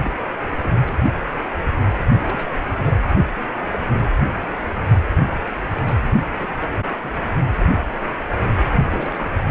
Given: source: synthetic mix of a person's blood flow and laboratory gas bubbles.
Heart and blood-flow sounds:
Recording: Doppler ultrasound of blood flow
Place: precordium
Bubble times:
0.02-0.12 s: bubbles
0.63-0.80 s: bubbles
0.85-0.94 s: bubbles
2.23-2.50 s: bubbles
2.52-2.60 s: bubbles
2.72-3.02 s: bubbles
5.11-5.29 s: bubbles
5.78-5.81 s: bubbles
5.86-5.94 s: bubbles
6.39-6.78 s: bubbles
7.02-7.30 s: bubbles
8.85-9.42 s: bubbles
From the record:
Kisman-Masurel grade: 221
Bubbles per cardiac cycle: several, 3 to 8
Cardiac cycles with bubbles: 10 to 50%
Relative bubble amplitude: barely perceptible (0.100 to 0.250)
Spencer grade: 2 (many but less than half of the cardiac periods contain bubble signals, singularly or in groups)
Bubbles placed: only in the low amplitude regions of the cardiac cycle

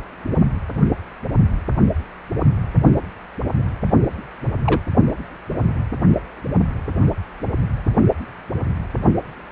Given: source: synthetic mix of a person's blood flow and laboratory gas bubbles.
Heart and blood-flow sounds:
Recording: Doppler ultrasound of blood flow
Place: precordium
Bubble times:
4.64-4.81 s: bubbles
From the record:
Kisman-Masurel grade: 122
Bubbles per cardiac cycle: 1 to 2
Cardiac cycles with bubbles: 10 to 50%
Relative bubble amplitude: moderate (0.250 to 0.450)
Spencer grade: 2 (many but less than half of the cardiac periods contain bubble signals, singularly or in groups)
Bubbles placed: only in the low amplitude regions of the cardiac cycle

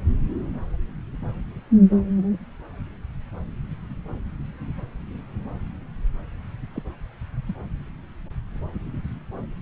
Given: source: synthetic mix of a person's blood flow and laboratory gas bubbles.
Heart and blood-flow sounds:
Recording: Doppler ultrasound of blood flow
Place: subclavian vein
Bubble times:
6.75-6.82 s: bubbles
7.48-7.54 s: bubbles
From the record:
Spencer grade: 2 (many but less than half of the cardiac periods contain bubble signals, singularly or in groups)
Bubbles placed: anywhere in the cardiac cycle

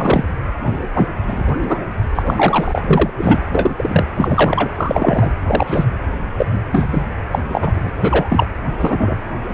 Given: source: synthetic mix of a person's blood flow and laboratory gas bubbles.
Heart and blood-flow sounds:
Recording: Doppler ultrasound of blood flow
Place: precordium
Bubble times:
0.00-0.24 s: bubbles
0.63-0.73 s: bubbles
0.94-1.08 s: bubbles
1.26-1.43 s: bubbles
1.49-1.56 s: bubbles
1.62-1.79 s: bubbles
2.15-2.23 s: bubbles
2.25-2.81 s: bubbles
2.90-3.10 s: bubbles
3.17-3.38 s: bubbles
3.52-4.06 s: bubbles
4.16-4.71 s: bubbles
4.75-5.31 s: bubbles
5.48-5.85 s: bubbles
6.38-6.46 s: bubbles
6.71-7.05 s: bubbles
7.31-7.39 s: bubbles
7.49-7.90 s: bubbles
8.02-8.26 s: bubbles
8.29-8.48 s: bubbles
8.79-9.16 s: bubbles
9.48-9.54 s: bubbles
From the record:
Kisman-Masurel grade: 243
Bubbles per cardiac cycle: several, 3 to 8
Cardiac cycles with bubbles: 100%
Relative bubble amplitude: loud (0.450 to 0.775)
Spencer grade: 3 (all of the cardiac periods contain showers or single bubble signals, but not dominating or overriding the cardiac motion signals)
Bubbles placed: anywhere in the cardiac cycle

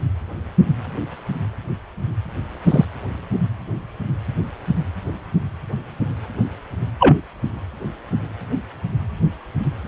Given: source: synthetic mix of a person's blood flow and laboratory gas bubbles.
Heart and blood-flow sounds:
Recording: Doppler ultrasound of blood flow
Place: precordium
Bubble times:
2.67-2.85 s: bubbles
7.00-7.21 s: bubbles
From the record:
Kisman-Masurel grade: 123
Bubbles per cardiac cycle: 1 to 2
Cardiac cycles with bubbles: 10 to 50%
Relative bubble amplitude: loud (0.450 to 0.775)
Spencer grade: 2 (many but less than half of the cardiac periods contain bubble signals, singularly or in groups)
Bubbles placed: anywhere in the cardiac cycle

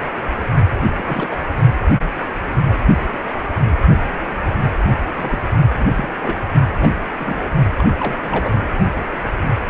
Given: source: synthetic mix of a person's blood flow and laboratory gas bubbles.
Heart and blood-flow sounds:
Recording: Doppler ultrasound of blood flow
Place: precordium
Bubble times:
0.97-1.38 s: bubbles
5.16-5.38 s: bubbles
5.79-5.86 s: bubbles
5.97-6.09 s: bubbles
6.22-6.37 s: bubbles
6.80-6.90 s: bubbles
7.16-7.51 s: bubbles
7.78-7.89 s: bubbles
7.98-8.67 s: bubbles
From the record:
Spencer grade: 2 (many but less than half of the cardiac periods contain bubble signals, singularly or in groups)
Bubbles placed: only in the low amplitude regions of the cardiac cycle

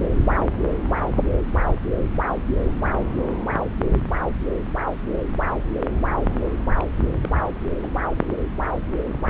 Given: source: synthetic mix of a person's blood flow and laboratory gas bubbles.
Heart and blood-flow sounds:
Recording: Doppler ultrasound of blood flow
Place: subclavian vein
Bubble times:
6.80-6.83 s: bubbles
7.21-7.27 s: bubbles
7.83-7.86 s: bubbles
8.21-8.25 s: bubbles
From the record:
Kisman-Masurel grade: 221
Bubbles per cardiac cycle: several, 3 to 8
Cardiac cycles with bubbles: 10 to 50%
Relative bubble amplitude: barely perceptible (0.100 to 0.250)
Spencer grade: 2 (many but less than half of the cardiac periods contain bubble signals, singularly or in groups)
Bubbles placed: anywhere in the cardiac cycle

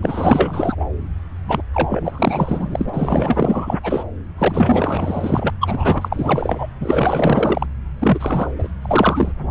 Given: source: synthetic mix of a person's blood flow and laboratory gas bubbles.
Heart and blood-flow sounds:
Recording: Doppler ultrasound of blood flow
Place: subclavian vein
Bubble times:
0.02-0.75 s: bubbles
0.79-0.86 s: bubbles
1.46-1.63 s: bubbles
1.73-2.90 s: bubbles
2.93-3.78 s: bubbles
3.83-4.04 s: bubbles
4.37-5.50 s: bubbles
5.61-6.67 s: bubbles
6.80-7.67 s: bubbles
7.99-8.51 s: bubbles
8.58-8.68 s: bubbles
8.82-9.32 s: bubbles
From the record:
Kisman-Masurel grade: 444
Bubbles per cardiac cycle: continuous sound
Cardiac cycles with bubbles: 100%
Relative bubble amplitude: maximal (0.775 to 0.999)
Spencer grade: 4 (maximum detectable bubble signal sounding continuously throughout systole and diastole of every cardiac period, and overriding the amplitude of the normal cardiac signals)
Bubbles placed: anywhere in the cardiac cycle

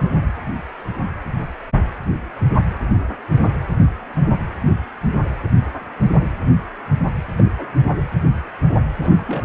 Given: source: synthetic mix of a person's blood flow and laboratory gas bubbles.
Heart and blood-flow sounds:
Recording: Doppler ultrasound of blood flow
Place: precordium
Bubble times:
0.00-0.04 s: bubbles
7.38-7.52 s: bubbles
7.58-7.66 s: bubbles
8.96-9.21 s: bubbles
9.27-9.45 s: bubbles
From the record:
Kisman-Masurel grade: 221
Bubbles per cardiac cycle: several, 3 to 8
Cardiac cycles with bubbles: 10 to 50%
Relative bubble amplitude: barely perceptible (0.100 to 0.250)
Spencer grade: 2 (many but less than half of the cardiac periods contain bubble signals, singularly or in groups)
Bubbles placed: anywhere in the cardiac cycle

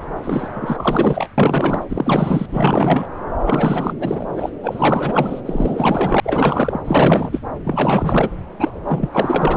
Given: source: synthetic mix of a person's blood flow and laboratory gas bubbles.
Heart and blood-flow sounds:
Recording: Doppler ultrasound of blood flow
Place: subclavian vein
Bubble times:
0.24-0.49 s: bubbles
0.53-1.27 s: bubbles
1.38-1.83 s: bubbles
1.89-2.46 s: bubbles
2.50-3.08 s: bubbles
3.44-3.94 s: bubbles
4.00-4.50 s: bubbles
4.62-5.42 s: bubbles
5.46-6.20 s: bubbles
6.23-6.80 s: bubbles
6.84-7.39 s: bubbles
7.64-8.30 s: bubbles
8.59-8.80 s: bubbles
8.85-9.10 s: bubbles
9.12-9.57 s: bubbles
From the record:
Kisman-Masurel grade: 444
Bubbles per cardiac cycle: continuous sound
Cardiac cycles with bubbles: 100%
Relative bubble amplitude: maximal (0.775 to 0.999)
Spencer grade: 4 (maximum detectable bubble signal sounding continuously throughout systole and diastole of every cardiac period, and overriding the amplitude of the normal cardiac signals)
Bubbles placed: anywhere in the cardiac cycle

